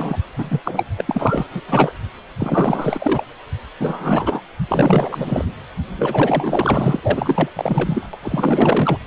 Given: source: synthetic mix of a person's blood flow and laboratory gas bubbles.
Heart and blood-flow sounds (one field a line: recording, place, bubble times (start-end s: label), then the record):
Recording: Doppler ultrasound of blood flow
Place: precordium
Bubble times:
0.00-0.18 s: bubbles
0.34-0.61 s: bubbles
0.64-0.84 s: bubbles
0.97-1.48 s: bubbles
1.51-1.62 s: bubbles
1.68-1.92 s: bubbles
2.37-3.23 s: bubbles
3.79-4.42 s: bubbles
4.68-5.52 s: bubbles
5.96-6.99 s: bubbles
7.03-7.49 s: bubbles
7.56-8.09 s: bubbles
8.13-8.98 s: bubbles
From the record:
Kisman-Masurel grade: 444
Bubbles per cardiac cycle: continuous sound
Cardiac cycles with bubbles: 100%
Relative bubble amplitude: maximal (0.775 to 0.999)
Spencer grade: 4 (maximum detectable bubble signal sounding continuously throughout systole and diastole of every cardiac period, and overriding the amplitude of the normal cardiac signals)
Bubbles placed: anywhere in the cardiac cycle